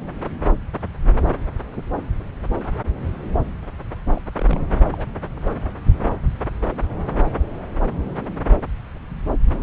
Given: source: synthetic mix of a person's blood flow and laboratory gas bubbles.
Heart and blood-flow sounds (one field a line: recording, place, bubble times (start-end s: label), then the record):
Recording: Doppler ultrasound of blood flow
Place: subclavian vein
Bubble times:
4.14-4.22 s: bubbles
4.36-4.61 s: bubbles
4.93-5.06 s: bubbles
From the record:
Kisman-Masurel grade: 121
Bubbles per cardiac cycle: 1 to 2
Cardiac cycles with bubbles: 10 to 50%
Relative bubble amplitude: barely perceptible (0.100 to 0.250)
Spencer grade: 2 (many but less than half of the cardiac periods contain bubble signals, singularly or in groups)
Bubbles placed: anywhere in the cardiac cycle